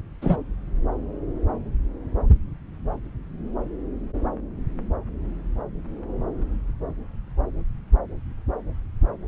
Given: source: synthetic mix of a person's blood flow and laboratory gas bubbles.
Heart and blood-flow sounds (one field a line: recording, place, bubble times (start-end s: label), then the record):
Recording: Doppler ultrasound of blood flow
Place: subclavian vein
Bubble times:
0.21-0.36 s: bubbles
From the record:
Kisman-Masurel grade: 113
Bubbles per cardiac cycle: 1 to 2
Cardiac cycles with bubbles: 1 to 10%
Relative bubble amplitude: loud (0.450 to 0.775)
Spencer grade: 1 (occasional bubble signal discernible with the cardiac motion signal, with majority of cardiac periods free of bubbles)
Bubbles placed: anywhere in the cardiac cycle